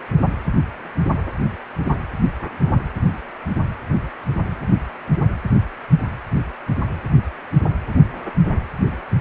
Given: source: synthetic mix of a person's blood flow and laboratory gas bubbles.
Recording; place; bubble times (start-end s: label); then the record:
Doppler ultrasound of blood flow; precordium
no bubbles
From the record:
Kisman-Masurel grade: 000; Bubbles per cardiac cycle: 0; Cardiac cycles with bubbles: 0%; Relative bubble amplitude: no bubbles discernible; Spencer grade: 0 (complete lack of bubble signals)